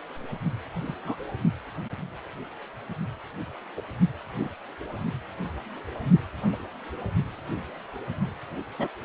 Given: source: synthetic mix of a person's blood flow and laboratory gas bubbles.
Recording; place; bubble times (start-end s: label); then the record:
Doppler ultrasound of blood flow; precordium
0.85-0.94 s: bubbles
1.05-1.16 s: bubbles
3.77-3.81 s: bubbles
4.38-4.49 s: bubbles
6.52-6.56 s: bubbles
8.78-8.88 s: bubbles
From the record:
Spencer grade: 2 (many but less than half of the cardiac periods contain bubble signals, singularly or in groups); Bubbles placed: only in the low amplitude regions of the cardiac cycle